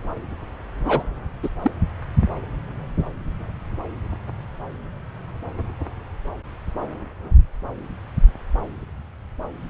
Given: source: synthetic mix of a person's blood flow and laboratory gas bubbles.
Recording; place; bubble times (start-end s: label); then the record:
Doppler ultrasound of blood flow; subclavian vein
0.85-1.03 s: bubbles
1.43-1.50 s: bubbles
1.62-1.71 s: bubbles
From the record:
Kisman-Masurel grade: 212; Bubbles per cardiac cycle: several, 3 to 8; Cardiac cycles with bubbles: 1 to 10%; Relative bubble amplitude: moderate (0.250 to 0.450); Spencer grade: 1 (occasional bubble signal discernible with the cardiac motion signal, with majority of cardiac periods free of bubbles); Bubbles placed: anywhere in the cardiac cycle